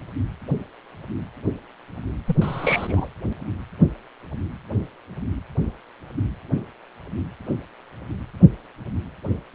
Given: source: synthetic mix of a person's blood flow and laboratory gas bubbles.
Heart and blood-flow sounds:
Doppler ultrasound of blood flow; precordium
2.27-2.36 s: bubbles
2.42-3.08 s: bubbles
From the record:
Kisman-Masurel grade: 211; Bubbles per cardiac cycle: several, 3 to 8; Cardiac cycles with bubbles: 1 to 10%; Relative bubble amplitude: barely perceptible (0.100 to 0.250); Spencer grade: 1 (occasional bubble signal discernible with the cardiac motion signal, with majority of cardiac periods free of bubbles); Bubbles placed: anywhere in the cardiac cycle

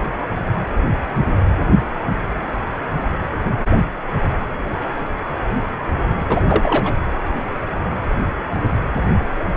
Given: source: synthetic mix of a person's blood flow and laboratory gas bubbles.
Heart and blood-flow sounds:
Doppler ultrasound of blood flow; precordium
6.29-6.46 s: bubbles
6.48-6.95 s: bubbles
From the record:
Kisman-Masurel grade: 213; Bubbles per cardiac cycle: several, 3 to 8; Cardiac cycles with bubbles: 1 to 10%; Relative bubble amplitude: loud (0.450 to 0.775); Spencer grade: 1 (occasional bubble signal discernible with the cardiac motion signal, with majority of cardiac periods free of bubbles); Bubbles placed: anywhere in the cardiac cycle

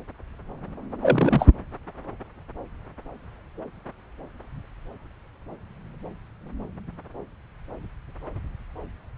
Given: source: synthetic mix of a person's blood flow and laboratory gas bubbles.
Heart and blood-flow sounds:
Doppler ultrasound of blood flow; subclavian vein
1.02-1.48 s: bubbles
From the record:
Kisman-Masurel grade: 213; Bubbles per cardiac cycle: several, 3 to 8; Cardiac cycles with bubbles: 1 to 10%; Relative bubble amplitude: loud (0.450 to 0.775); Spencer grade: 1 (occasional bubble signal discernible with the cardiac motion signal, with majority of cardiac periods free of bubbles); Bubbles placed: anywhere in the cardiac cycle

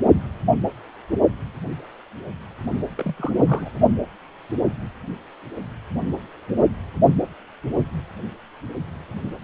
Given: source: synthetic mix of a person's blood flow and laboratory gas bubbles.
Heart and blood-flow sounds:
Doppler ultrasound of blood flow; precordium
2.97-3.32 s: bubbles
3.38-3.70 s: bubbles
From the record:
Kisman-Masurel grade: 211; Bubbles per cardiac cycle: several, 3 to 8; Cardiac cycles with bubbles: 1 to 10%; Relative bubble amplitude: barely perceptible (0.100 to 0.250); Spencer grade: 1 (occasional bubble signal discernible with the cardiac motion signal, with majority of cardiac periods free of bubbles); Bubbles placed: only in the low amplitude regions of the cardiac cycle

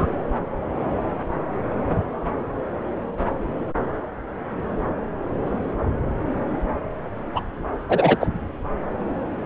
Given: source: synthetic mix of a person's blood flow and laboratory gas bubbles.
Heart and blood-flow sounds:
Doppler ultrasound of blood flow; subclavian vein
0.00-0.07 s: bubbles
7.34-7.41 s: bubbles
7.89-8.16 s: bubbles
8.21-8.27 s: bubbles
From the record:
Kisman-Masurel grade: 223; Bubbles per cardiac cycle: several, 3 to 8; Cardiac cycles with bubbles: 10 to 50%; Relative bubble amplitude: loud (0.450 to 0.775); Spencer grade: 2 (many but less than half of the cardiac periods contain bubble signals, singularly or in groups); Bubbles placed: anywhere in the cardiac cycle

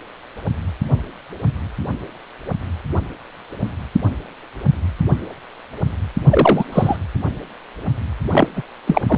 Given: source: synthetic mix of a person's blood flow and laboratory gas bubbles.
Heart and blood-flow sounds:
Doppler ultrasound of blood flow; precordium
6.29-6.64 s: bubbles
6.72-6.96 s: bubbles
8.31-8.48 s: bubbles
8.55-8.62 s: bubbles
8.87-9.01 s: bubbles
9.07-9.18 s: bubbles
From the record:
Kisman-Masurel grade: 223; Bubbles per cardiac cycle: several, 3 to 8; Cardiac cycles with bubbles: 10 to 50%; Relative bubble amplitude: loud (0.450 to 0.775); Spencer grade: 2 (many but less than half of the cardiac periods contain bubble signals, singularly or in groups); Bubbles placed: anywhere in the cardiac cycle

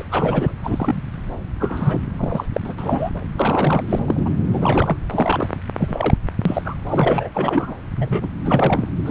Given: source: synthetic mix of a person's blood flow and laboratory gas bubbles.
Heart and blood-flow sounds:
Doppler ultrasound of blood flow; subclavian vein
0.00-0.03 s: bubbles
0.11-0.51 s: bubbles
0.63-1.02 s: bubbles
1.59-2.01 s: bubbles
2.17-2.46 s: bubbles
2.52-2.60 s: bubbles
2.65-2.74 s: bubbles
2.78-3.10 s: bubbles
3.36-3.84 s: bubbles
3.89-4.00 s: bubbles
4.06-4.29 s: bubbles
4.50-4.98 s: bubbles
5.10-5.46 s: bubbles
5.78-6.15 s: bubbles
6.45-6.62 s: bubbles
6.64-6.75 s: bubbles
6.88-7.30 s: bubbles
7.34-7.75 s: bubbles
7.95-8.28 s: bubbles
8.45-8.88 s: bubbles
9.04-9.11 s: bubbles
From the record:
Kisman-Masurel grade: 233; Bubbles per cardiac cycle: several, 3 to 8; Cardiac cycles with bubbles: 50 to 99%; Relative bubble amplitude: loud (0.450 to 0.775); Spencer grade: 3 (all of the cardiac periods contain showers or single bubble signals, but not dominating or overriding the cardiac motion signals); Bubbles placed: anywhere in the cardiac cycle

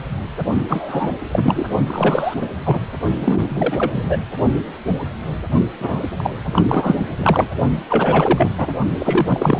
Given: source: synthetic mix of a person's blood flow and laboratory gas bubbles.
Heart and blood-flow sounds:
Doppler ultrasound of blood flow; precordium
0.68-1.16 s: bubbles
1.31-1.65 s: bubbles
1.86-2.34 s: bubbles
2.41-2.46 s: bubbles
2.64-2.80 s: bubbles
3.20-3.45 s: bubbles
3.49-4.27 s: bubbles
5.79-6.04 s: bubbles
6.17-6.30 s: bubbles
6.53-6.63 s: bubbles
6.69-6.96 s: bubbles
7.18-7.49 s: bubbles
7.89-8.52 s: bubbles
8.58-8.67 s: bubbles
8.98-9.60 s: bubbles
From the record:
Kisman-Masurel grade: 333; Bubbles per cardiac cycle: rolling drumbeat, 9 or more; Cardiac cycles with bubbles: 50 to 99%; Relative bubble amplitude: loud (0.450 to 0.775); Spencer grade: 3 (all of the cardiac periods contain showers or single bubble signals, but not dominating or overriding the cardiac motion signals); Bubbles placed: only in the low amplitude regions of the cardiac cycle

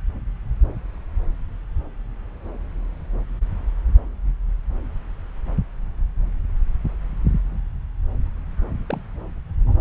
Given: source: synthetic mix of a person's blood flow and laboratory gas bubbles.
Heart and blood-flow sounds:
Doppler ultrasound of blood flow; subclavian vein
8.87-9.01 s: bubbles
From the record:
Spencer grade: 1 (occasional bubble signal discernible with the cardiac motion signal, with majority of cardiac periods free of bubbles); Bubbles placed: anywhere in the cardiac cycle

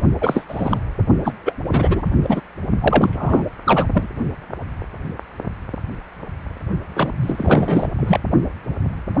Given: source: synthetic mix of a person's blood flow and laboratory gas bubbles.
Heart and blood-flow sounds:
Doppler ultrasound of blood flow; precordium
0.21-0.45 s: bubbles
0.48-0.80 s: bubbles
1.24-1.33 s: bubbles
1.46-1.54 s: bubbles
1.69-2.12 s: bubbles
2.22-2.41 s: bubbles
2.81-3.44 s: bubbles
3.65-3.86 s: bubbles
3.93-4.09 s: bubbles
6.94-7.12 s: bubbles
7.22-7.87 s: bubbles
7.95-8.19 s: bubbles
From the record:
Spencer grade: 3 (all of the cardiac periods contain showers or single bubble signals, but not dominating or overriding the cardiac motion signals); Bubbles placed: only in the low amplitude regions of the cardiac cycle

